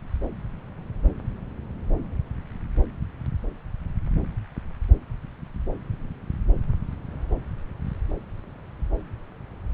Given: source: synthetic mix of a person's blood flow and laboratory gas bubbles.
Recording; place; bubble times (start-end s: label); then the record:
Doppler ultrasound of blood flow; subclavian vein
no bubbles
From the record:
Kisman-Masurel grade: 000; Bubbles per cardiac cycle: 0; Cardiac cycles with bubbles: 0%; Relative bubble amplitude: no bubbles discernible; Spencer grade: 0 (complete lack of bubble signals)